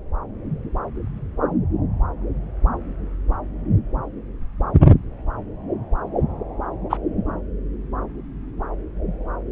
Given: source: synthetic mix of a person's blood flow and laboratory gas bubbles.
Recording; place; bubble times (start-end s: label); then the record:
Doppler ultrasound of blood flow; subclavian vein
6.89-6.97 s: bubbles
From the record:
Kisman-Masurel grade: 113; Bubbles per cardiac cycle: 1 to 2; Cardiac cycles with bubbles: 1 to 10%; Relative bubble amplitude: loud (0.450 to 0.775); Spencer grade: 1 (occasional bubble signal discernible with the cardiac motion signal, with majority of cardiac periods free of bubbles); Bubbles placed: anywhere in the cardiac cycle